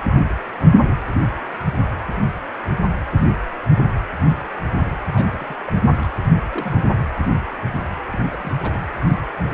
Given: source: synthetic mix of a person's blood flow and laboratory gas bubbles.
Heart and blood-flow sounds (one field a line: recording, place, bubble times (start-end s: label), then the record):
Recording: Doppler ultrasound of blood flow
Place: precordium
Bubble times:
5.13-5.58 s: bubbles
5.67-5.73 s: bubbles
5.98-6.11 s: bubbles
6.50-6.80 s: bubbles
8.12-8.22 s: bubbles
8.32-8.53 s: bubbles
8.62-8.79 s: bubbles
From the record:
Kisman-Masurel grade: 221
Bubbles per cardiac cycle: several, 3 to 8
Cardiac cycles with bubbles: 10 to 50%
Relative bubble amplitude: barely perceptible (0.100 to 0.250)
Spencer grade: 2 (many but less than half of the cardiac periods contain bubble signals, singularly or in groups)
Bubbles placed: anywhere in the cardiac cycle